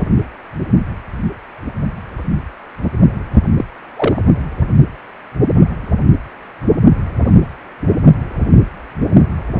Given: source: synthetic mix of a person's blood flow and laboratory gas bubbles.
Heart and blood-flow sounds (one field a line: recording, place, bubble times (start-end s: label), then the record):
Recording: Doppler ultrasound of blood flow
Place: precordium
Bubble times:
3.57-3.65 s: bubbles
3.96-4.22 s: bubbles
From the record:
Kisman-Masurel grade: 112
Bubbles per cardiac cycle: 1 to 2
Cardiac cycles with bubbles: 1 to 10%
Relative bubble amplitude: moderate (0.250 to 0.450)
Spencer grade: 1 (occasional bubble signal discernible with the cardiac motion signal, with majority of cardiac periods free of bubbles)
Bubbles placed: only in the low amplitude regions of the cardiac cycle